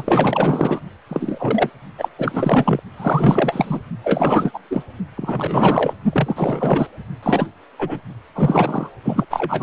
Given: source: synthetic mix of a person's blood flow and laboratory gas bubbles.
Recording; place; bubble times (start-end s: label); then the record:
Doppler ultrasound of blood flow; precordium
0.00-0.79 s: bubbles
1.09-1.70 s: bubbles
1.98-2.08 s: bubbles
2.18-2.80 s: bubbles
2.97-3.82 s: bubbles
4.04-4.51 s: bubbles
4.54-4.59 s: bubbles
4.70-4.83 s: bubbles
5.16-5.93 s: bubbles
6.12-6.88 s: bubbles
7.22-7.47 s: bubbles
7.78-7.99 s: bubbles
8.35-8.91 s: bubbles
9.04-9.25 s: bubbles
9.30-9.63 s: bubbles
From the record:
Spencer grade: 4 (maximum detectable bubble signal sounding continuously throughout systole and diastole of every cardiac period, and overriding the amplitude of the normal cardiac signals); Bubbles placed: only in the low amplitude regions of the cardiac cycle